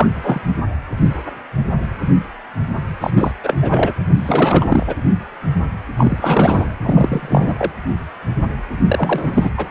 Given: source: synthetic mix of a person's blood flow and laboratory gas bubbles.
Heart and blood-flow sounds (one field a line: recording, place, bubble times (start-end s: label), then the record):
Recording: Doppler ultrasound of blood flow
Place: precordium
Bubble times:
0.00-0.08 s: bubbles
0.13-0.54 s: bubbles
3.00-3.10 s: bubbles
3.17-3.31 s: bubbles
3.43-3.56 s: bubbles
3.60-3.93 s: bubbles
4.13-4.66 s: bubbles
4.68-4.95 s: bubbles
5.96-6.76 s: bubbles
6.79-7.71 s: bubbles
8.87-9.50 s: bubbles
9.57-9.67 s: bubbles
From the record:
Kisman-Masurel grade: 333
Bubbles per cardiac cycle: rolling drumbeat, 9 or more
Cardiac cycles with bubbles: 50 to 99%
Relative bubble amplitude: loud (0.450 to 0.775)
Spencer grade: 3 (all of the cardiac periods contain showers or single bubble signals, but not dominating or overriding the cardiac motion signals)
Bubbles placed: anywhere in the cardiac cycle